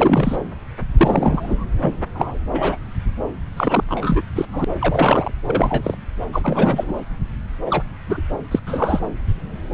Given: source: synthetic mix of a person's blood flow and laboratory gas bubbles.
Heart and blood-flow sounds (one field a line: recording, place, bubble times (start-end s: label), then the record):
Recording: Doppler ultrasound of blood flow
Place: subclavian vein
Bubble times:
0.00-0.36 s: bubbles
0.97-1.65 s: bubbles
1.82-1.94 s: bubbles
2.15-2.38 s: bubbles
2.51-2.77 s: bubbles
3.57-3.84 s: bubbles
3.89-4.21 s: bubbles
4.35-4.46 s: bubbles
4.50-4.64 s: bubbles
4.80-5.31 s: bubbles
5.46-5.97 s: bubbles
6.33-6.92 s: bubbles
7.66-7.83 s: bubbles
8.07-8.21 s: bubbles
8.51-8.60 s: bubbles
8.66-9.07 s: bubbles
From the record:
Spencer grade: 3 (all of the cardiac periods contain showers or single bubble signals, but not dominating or overriding the cardiac motion signals)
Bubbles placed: anywhere in the cardiac cycle